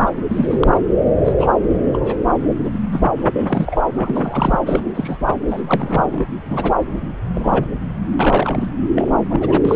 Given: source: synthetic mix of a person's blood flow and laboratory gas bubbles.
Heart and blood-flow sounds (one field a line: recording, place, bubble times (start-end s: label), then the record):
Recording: Doppler ultrasound of blood flow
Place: subclavian vein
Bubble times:
0.00-0.12 s: bubbles
0.29-0.78 s: bubbles
1.24-1.32 s: bubbles
1.38-1.46 s: bubbles
1.93-2.17 s: bubbles
2.65-2.79 s: bubbles
2.92-3.00 s: bubbles
3.16-3.81 s: bubbles
3.96-4.59 s: bubbles
4.66-4.91 s: bubbles
4.95-5.18 s: bubbles
5.26-5.33 s: bubbles
5.51-5.62 s: bubbles
5.67-6.26 s: bubbles
6.45-6.74 s: bubbles
7.35-7.68 s: bubbles
8.19-8.67 s: bubbles
8.95-9.10 s: bubbles
9.29-9.60 s: bubbles
9.64-9.75 s: bubbles
From the record:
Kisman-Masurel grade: 242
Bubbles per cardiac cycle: several, 3 to 8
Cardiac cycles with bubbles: 100%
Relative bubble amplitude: moderate (0.250 to 0.450)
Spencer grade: 3 (all of the cardiac periods contain showers or single bubble signals, but not dominating or overriding the cardiac motion signals)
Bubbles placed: anywhere in the cardiac cycle